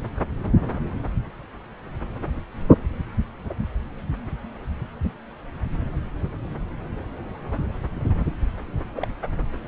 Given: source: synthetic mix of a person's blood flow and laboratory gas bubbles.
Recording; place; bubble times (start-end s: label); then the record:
Doppler ultrasound of blood flow; subclavian vein
8.94-9.07 s: bubbles
From the record:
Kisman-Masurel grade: 111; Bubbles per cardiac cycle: 1 to 2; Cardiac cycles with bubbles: 1 to 10%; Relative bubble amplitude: barely perceptible (0.100 to 0.250); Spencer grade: 1 (occasional bubble signal discernible with the cardiac motion signal, with majority of cardiac periods free of bubbles); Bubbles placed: anywhere in the cardiac cycle